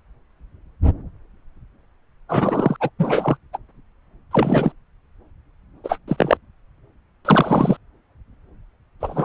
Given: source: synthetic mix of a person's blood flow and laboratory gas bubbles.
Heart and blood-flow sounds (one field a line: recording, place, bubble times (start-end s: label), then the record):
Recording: Doppler ultrasound of blood flow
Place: subclavian vein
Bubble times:
2.29-2.76 s: bubbles
2.80-2.90 s: bubbles
2.98-3.37 s: bubbles
3.53-3.58 s: bubbles
4.31-4.72 s: bubbles
5.83-5.98 s: bubbles
6.08-6.37 s: bubbles
7.25-7.77 s: bubbles
9.01-9.25 s: bubbles
From the record:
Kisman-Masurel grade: 223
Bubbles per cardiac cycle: several, 3 to 8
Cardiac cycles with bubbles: 10 to 50%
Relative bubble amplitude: loud (0.450 to 0.775)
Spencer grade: 2 (many but less than half of the cardiac periods contain bubble signals, singularly or in groups)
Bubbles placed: anywhere in the cardiac cycle